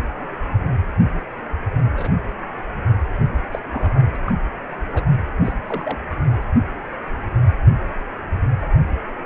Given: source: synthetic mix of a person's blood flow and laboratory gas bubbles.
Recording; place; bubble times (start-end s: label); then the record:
Doppler ultrasound of blood flow; precordium
1.96-2.09 s: bubbles
3.52-3.59 s: bubbles
3.71-4.16 s: bubbles
4.26-4.33 s: bubbles
4.93-5.03 s: bubbles
5.45-5.53 s: bubbles
5.68-5.98 s: bubbles
From the record:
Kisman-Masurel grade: 121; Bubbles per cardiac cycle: 1 to 2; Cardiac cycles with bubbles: 10 to 50%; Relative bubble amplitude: barely perceptible (0.100 to 0.250); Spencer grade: 2 (many but less than half of the cardiac periods contain bubble signals, singularly or in groups); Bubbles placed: anywhere in the cardiac cycle